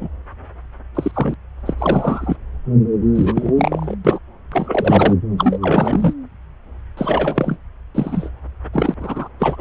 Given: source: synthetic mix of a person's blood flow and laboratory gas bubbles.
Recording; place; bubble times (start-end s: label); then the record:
Doppler ultrasound of blood flow; subclavian vein
0.00-0.09 s: bubbles
0.95-1.35 s: bubbles
1.66-1.74 s: bubbles
1.78-2.37 s: bubbles
3.15-3.52 s: bubbles
3.56-3.96 s: bubbles
4.04-4.19 s: bubbles
4.52-5.14 s: bubbles
5.38-5.58 s: bubbles
5.61-6.13 s: bubbles
6.97-7.57 s: bubbles
7.94-8.29 s: bubbles
8.73-8.94 s: bubbles
8.99-9.29 s: bubbles
9.39-9.61 s: bubbles
From the record:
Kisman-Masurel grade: 233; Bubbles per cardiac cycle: several, 3 to 8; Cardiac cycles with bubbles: 50 to 99%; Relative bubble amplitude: loud (0.450 to 0.775); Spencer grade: 3 (all of the cardiac periods contain showers or single bubble signals, but not dominating or overriding the cardiac motion signals); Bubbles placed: anywhere in the cardiac cycle